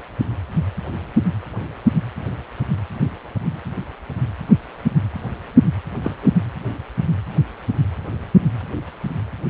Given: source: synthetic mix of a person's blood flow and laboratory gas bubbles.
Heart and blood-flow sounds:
Doppler ultrasound of blood flow; precordium
6.04-6.16 s: bubbles
6.23-6.31 s: bubbles
From the record:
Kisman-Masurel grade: 112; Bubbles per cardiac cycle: 1 to 2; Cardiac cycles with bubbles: 1 to 10%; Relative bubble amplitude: moderate (0.250 to 0.450); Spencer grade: 1 (occasional bubble signal discernible with the cardiac motion signal, with majority of cardiac periods free of bubbles); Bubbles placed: anywhere in the cardiac cycle

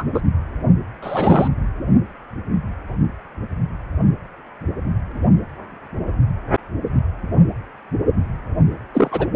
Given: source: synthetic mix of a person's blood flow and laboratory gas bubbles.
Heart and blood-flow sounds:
Doppler ultrasound of blood flow; precordium
0.00-0.04 s: bubbles
0.14-0.21 s: bubbles
1.02-1.48 s: bubbles
8.93-9.27 s: bubbles
From the record:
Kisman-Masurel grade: 223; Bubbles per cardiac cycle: several, 3 to 8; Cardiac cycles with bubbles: 10 to 50%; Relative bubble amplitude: loud (0.450 to 0.775); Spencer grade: 2 (many but less than half of the cardiac periods contain bubble signals, singularly or in groups); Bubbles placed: anywhere in the cardiac cycle

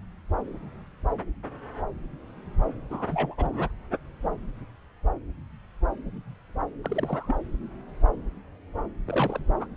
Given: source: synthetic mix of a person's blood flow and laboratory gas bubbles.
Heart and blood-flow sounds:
Doppler ultrasound of blood flow; subclavian vein
2.90-3.35 s: bubbles
3.38-3.68 s: bubbles
6.84-7.36 s: bubbles
9.05-9.39 s: bubbles
9.60-9.67 s: bubbles
From the record:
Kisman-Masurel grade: 221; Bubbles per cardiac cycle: several, 3 to 8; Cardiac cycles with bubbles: 10 to 50%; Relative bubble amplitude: barely perceptible (0.100 to 0.250); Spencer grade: 2 (many but less than half of the cardiac periods contain bubble signals, singularly or in groups); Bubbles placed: anywhere in the cardiac cycle

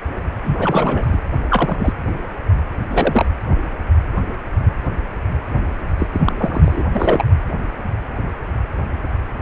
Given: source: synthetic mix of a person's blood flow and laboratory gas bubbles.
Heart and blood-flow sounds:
Doppler ultrasound of blood flow; precordium
0.44-1.19 s: bubbles
1.49-1.93 s: bubbles
2.09-2.14 s: bubbles
2.88-3.27 s: bubbles
5.98-6.08 s: bubbles
6.13-6.21 s: bubbles
6.25-6.33 s: bubbles
6.38-6.83 s: bubbles
6.95-7.23 s: bubbles
From the record:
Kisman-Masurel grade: 223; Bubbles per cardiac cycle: several, 3 to 8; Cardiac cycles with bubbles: 10 to 50%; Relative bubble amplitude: loud (0.450 to 0.775); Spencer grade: 2 (many but less than half of the cardiac periods contain bubble signals, singularly or in groups); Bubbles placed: anywhere in the cardiac cycle

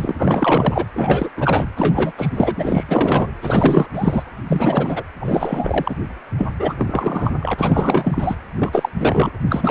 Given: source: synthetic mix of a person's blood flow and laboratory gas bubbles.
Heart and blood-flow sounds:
Doppler ultrasound of blood flow; precordium
0.00-0.17 s: bubbles
0.19-0.86 s: bubbles
0.94-1.29 s: bubbles
1.36-1.66 s: bubbles
1.76-2.12 s: bubbles
2.17-2.84 s: bubbles
2.88-3.27 s: bubbles
3.41-3.88 s: bubbles
3.94-4.23 s: bubbles
4.48-5.03 s: bubbles
5.20-5.96 s: bubbles
6.37-6.46 s: bubbles
6.59-6.74 s: bubbles
6.77-7.32 s: bubbles
7.40-7.55 s: bubbles
7.58-8.36 s: bubbles
8.56-8.89 s: bubbles
8.99-9.30 s: bubbles
9.48-9.71 s: bubbles
From the record:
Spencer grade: 4 (maximum detectable bubble signal sounding continuously throughout systole and diastole of every cardiac period, and overriding the amplitude of the normal cardiac signals); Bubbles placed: anywhere in the cardiac cycle

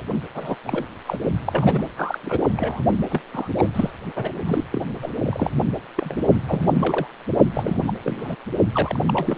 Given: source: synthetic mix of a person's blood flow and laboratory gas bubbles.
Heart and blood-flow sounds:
Doppler ultrasound of blood flow; precordium
0.00-0.02 s: bubbles
0.35-0.55 s: bubbles
0.65-0.85 s: bubbles
1.06-1.17 s: bubbles
1.45-1.82 s: bubbles
1.97-2.19 s: bubbles
2.23-2.41 s: bubbles
2.56-2.84 s: bubbles
3.09-3.21 s: bubbles
3.32-3.48 s: bubbles
3.57-3.68 s: bubbles
3.75-3.91 s: bubbles
4.16-4.33 s: bubbles
4.46-4.64 s: bubbles
4.72-4.81 s: bubbles
5.02-5.11 s: bubbles
5.22-5.55 s: bubbles
5.97-6.37 s: bubbles
6.46-7.07 s: bubbles
7.54-7.84 s: bubbles
7.87-7.94 s: bubbles
8.04-8.36 s: bubbles
8.72-8.98 s: bubbles
9.07-9.38 s: bubbles
From the record:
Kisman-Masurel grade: 342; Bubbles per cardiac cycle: rolling drumbeat, 9 or more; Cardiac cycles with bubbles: 100%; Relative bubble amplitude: moderate (0.250 to 0.450); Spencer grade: 3 (all of the cardiac periods contain showers or single bubble signals, but not dominating or overriding the cardiac motion signals); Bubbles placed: only in the low amplitude regions of the cardiac cycle

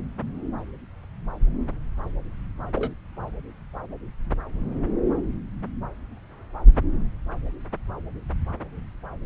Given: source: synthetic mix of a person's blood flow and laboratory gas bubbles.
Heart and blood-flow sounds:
Doppler ultrasound of blood flow; subclavian vein
2.75-2.92 s: bubbles
From the record:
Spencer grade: 1 (occasional bubble signal discernible with the cardiac motion signal, with majority of cardiac periods free of bubbles); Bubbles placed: anywhere in the cardiac cycle

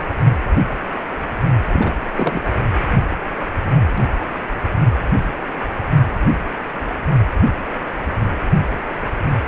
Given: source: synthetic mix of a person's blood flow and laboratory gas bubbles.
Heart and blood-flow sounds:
Doppler ultrasound of blood flow; precordium
1.72-1.95 s: bubbles
2.17-2.41 s: bubbles
From the record:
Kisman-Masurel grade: 213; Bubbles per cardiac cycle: several, 3 to 8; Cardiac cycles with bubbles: 1 to 10%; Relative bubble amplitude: loud (0.450 to 0.775); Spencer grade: 1 (occasional bubble signal discernible with the cardiac motion signal, with majority of cardiac periods free of bubbles); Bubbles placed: anywhere in the cardiac cycle

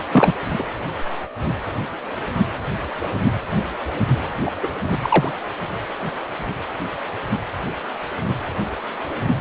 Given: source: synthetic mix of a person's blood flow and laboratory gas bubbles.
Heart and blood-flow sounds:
Doppler ultrasound of blood flow; precordium
0.12-0.33 s: bubbles
0.58-0.62 s: bubbles
4.45-4.50 s: bubbles
4.62-4.68 s: bubbles
4.83-4.96 s: bubbles
5.02-5.31 s: bubbles
From the record:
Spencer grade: 2 (many but less than half of the cardiac periods contain bubble signals, singularly or in groups); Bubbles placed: anywhere in the cardiac cycle

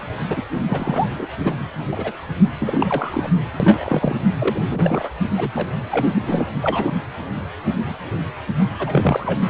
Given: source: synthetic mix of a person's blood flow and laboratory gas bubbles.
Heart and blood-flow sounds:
Doppler ultrasound of blood flow; precordium
0.28-0.45 s: bubbles
0.67-1.27 s: bubbles
1.44-1.56 s: bubbles
1.91-2.12 s: bubbles
2.60-3.31 s: bubbles
3.60-4.16 s: bubbles
4.38-5.08 s: bubbles
5.37-5.50 s: bubbles
5.54-5.67 s: bubbles
5.91-6.46 s: bubbles
6.62-6.92 s: bubbles
8.79-9.38 s: bubbles
From the record:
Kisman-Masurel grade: 232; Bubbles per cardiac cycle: several, 3 to 8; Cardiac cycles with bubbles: 50 to 99%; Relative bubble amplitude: moderate (0.250 to 0.450); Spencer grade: 3 (all of the cardiac periods contain showers or single bubble signals, but not dominating or overriding the cardiac motion signals); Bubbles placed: anywhere in the cardiac cycle

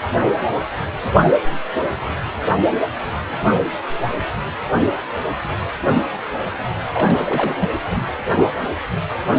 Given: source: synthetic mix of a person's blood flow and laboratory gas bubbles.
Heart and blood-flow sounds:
Doppler ultrasound of blood flow; precordium
6.88-7.70 s: bubbles
7.90-8.03 s: bubbles
From the record:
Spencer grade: 2 (many but less than half of the cardiac periods contain bubble signals, singularly or in groups); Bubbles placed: anywhere in the cardiac cycle

